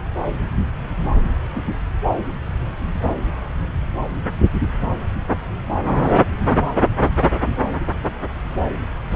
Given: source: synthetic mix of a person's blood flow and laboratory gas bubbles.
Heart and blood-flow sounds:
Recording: Doppler ultrasound of blood flow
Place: subclavian vein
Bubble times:
9.11-9.16 s: bubbles
From the record:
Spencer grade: 1 (occasional bubble signal discernible with the cardiac motion signal, with majority of cardiac periods free of bubbles)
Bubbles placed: anywhere in the cardiac cycle

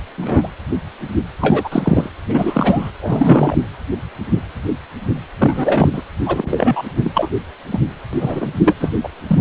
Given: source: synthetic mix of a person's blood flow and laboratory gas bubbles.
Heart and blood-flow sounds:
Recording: Doppler ultrasound of blood flow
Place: precordium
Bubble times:
0.18-0.48 s: bubbles
1.41-2.11 s: bubbles
2.29-2.91 s: bubbles
3.02-3.56 s: bubbles
5.38-6.01 s: bubbles
6.25-6.82 s: bubbles
7.01-7.29 s: bubbles
7.71-7.79 s: bubbles
8.12-8.51 s: bubbles
8.58-8.74 s: bubbles
8.79-8.91 s: bubbles
9.03-9.09 s: bubbles
9.27-9.41 s: bubbles
From the record:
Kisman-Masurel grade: 233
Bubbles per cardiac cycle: several, 3 to 8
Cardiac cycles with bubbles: 50 to 99%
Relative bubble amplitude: loud (0.450 to 0.775)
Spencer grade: 3 (all of the cardiac periods contain showers or single bubble signals, but not dominating or overriding the cardiac motion signals)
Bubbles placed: anywhere in the cardiac cycle

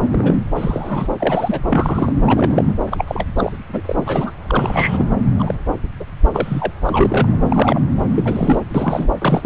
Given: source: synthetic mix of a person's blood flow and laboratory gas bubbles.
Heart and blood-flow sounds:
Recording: Doppler ultrasound of blood flow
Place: subclavian vein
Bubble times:
0.11-0.39 s: bubbles
0.55-1.08 s: bubbles
1.19-1.61 s: bubbles
1.69-2.12 s: bubbles
2.25-2.64 s: bubbles
2.67-2.75 s: bubbles
2.90-3.25 s: bubbles
3.38-3.52 s: bubbles
3.73-3.81 s: bubbles
3.85-4.31 s: bubbles
4.48-5.13 s: bubbles
5.39-5.54 s: bubbles
6.00-6.04 s: bubbles
6.32-6.73 s: bubbles
6.83-7.37 s: bubbles
7.50-7.81 s: bubbles
8.08-8.60 s: bubbles
8.74-9.08 s: bubbles
9.18-9.46 s: bubbles
From the record:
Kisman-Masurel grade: 242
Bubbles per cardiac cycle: several, 3 to 8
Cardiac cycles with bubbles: 100%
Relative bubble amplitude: moderate (0.250 to 0.450)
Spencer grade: 3 (all of the cardiac periods contain showers or single bubble signals, but not dominating or overriding the cardiac motion signals)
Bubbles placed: anywhere in the cardiac cycle

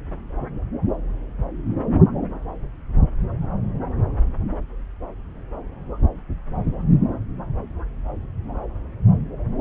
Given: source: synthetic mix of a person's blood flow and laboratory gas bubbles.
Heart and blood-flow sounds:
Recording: Doppler ultrasound of blood flow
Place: subclavian vein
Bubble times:
no bubbles
From the record:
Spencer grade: 0 (complete lack of bubble signals)

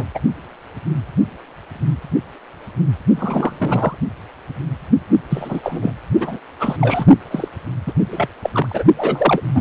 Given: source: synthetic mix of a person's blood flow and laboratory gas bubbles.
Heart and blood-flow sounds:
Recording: Doppler ultrasound of blood flow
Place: precordium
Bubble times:
0.00-0.04 s: bubbles
0.15-0.19 s: bubbles
3.15-3.98 s: bubbles
5.29-5.92 s: bubbles
6.20-6.39 s: bubbles
6.59-6.76 s: bubbles
6.80-7.05 s: bubbles
7.30-7.48 s: bubbles
7.86-7.93 s: bubbles
8.11-8.29 s: bubbles
8.43-8.84 s: bubbles
8.96-9.42 s: bubbles
9.54-9.61 s: bubbles
From the record:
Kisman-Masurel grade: 233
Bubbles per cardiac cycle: several, 3 to 8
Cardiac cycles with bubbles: 50 to 99%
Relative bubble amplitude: loud (0.450 to 0.775)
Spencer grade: 3 (all of the cardiac periods contain showers or single bubble signals, but not dominating or overriding the cardiac motion signals)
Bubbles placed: only in the low amplitude regions of the cardiac cycle

